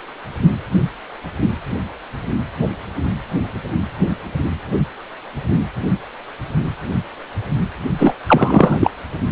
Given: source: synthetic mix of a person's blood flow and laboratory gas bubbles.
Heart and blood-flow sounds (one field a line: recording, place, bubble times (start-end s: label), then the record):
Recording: Doppler ultrasound of blood flow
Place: precordium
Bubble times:
7.98-8.12 s: bubbles
8.27-8.91 s: bubbles
From the record:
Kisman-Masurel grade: 213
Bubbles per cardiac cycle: several, 3 to 8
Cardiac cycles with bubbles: 1 to 10%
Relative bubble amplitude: loud (0.450 to 0.775)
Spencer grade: 1 (occasional bubble signal discernible with the cardiac motion signal, with majority of cardiac periods free of bubbles)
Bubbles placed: only in the low amplitude regions of the cardiac cycle